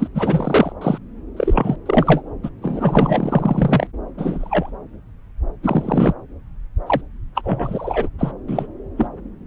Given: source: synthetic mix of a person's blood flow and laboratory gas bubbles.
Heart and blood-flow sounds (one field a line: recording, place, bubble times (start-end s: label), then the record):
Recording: Doppler ultrasound of blood flow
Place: subclavian vein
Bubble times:
0.00-0.07 s: bubbles
0.14-0.73 s: bubbles
0.81-0.98 s: bubbles
1.36-1.76 s: bubbles
1.85-2.22 s: bubbles
2.43-2.50 s: bubbles
2.61-3.87 s: bubbles
4.17-4.71 s: bubbles
5.62-6.15 s: bubbles
6.86-7.01 s: bubbles
7.34-8.09 s: bubbles
8.18-8.31 s: bubbles
8.47-8.67 s: bubbles
8.97-9.06 s: bubbles
From the record:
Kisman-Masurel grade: 243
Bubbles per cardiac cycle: several, 3 to 8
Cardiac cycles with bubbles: 100%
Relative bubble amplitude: loud (0.450 to 0.775)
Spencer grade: 3 (all of the cardiac periods contain showers or single bubble signals, but not dominating or overriding the cardiac motion signals)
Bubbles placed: anywhere in the cardiac cycle